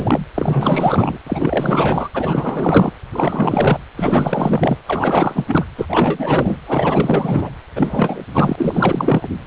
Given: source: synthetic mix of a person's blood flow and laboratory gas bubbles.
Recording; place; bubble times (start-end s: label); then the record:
Doppler ultrasound of blood flow; precordium
0.00-0.26 s: bubbles
0.34-1.18 s: bubbles
1.26-2.08 s: bubbles
2.14-2.93 s: bubbles
3.12-3.79 s: bubbles
3.96-4.79 s: bubbles
4.87-5.45 s: bubbles
5.47-5.65 s: bubbles
5.78-5.86 s: bubbles
5.88-6.57 s: bubbles
6.67-7.50 s: bubbles
7.75-8.22 s: bubbles
8.34-9.28 s: bubbles
From the record:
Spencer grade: 4 (maximum detectable bubble signal sounding continuously throughout systole and diastole of every cardiac period, and overriding the amplitude of the normal cardiac signals); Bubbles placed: anywhere in the cardiac cycle